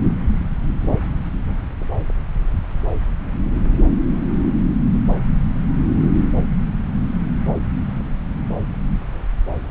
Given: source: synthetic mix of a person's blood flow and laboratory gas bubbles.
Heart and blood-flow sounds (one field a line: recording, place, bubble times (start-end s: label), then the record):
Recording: Doppler ultrasound of blood flow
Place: subclavian vein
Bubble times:
no bubbles
From the record:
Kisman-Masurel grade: 000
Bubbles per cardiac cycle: 0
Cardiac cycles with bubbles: 0%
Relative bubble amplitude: no bubbles discernible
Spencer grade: 0 (complete lack of bubble signals)